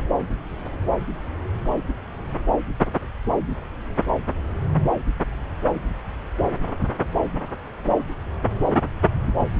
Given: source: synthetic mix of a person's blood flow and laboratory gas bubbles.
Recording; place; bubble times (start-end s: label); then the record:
Doppler ultrasound of blood flow; subclavian vein
no bubbles
From the record:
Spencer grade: 0 (complete lack of bubble signals)